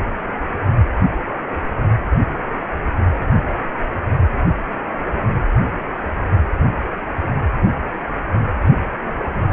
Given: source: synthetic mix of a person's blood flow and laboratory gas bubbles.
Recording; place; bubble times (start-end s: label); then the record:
Doppler ultrasound of blood flow; precordium
no bubbles
From the record:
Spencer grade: 0 (complete lack of bubble signals)